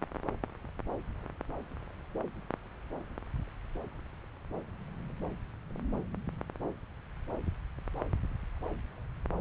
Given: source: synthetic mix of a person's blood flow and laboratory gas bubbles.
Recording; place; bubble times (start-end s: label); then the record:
Doppler ultrasound of blood flow; subclavian vein
no bubbles
From the record:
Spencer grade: 0 (complete lack of bubble signals)